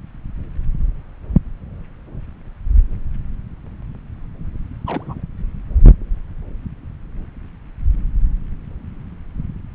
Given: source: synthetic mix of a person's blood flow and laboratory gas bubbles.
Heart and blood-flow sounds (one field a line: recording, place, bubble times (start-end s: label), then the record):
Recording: Doppler ultrasound of blood flow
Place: subclavian vein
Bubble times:
4.86-5.23 s: bubbles
From the record:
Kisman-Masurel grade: 211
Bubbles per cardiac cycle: several, 3 to 8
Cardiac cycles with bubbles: 1 to 10%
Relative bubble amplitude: barely perceptible (0.100 to 0.250)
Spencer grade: 1 (occasional bubble signal discernible with the cardiac motion signal, with majority of cardiac periods free of bubbles)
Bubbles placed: anywhere in the cardiac cycle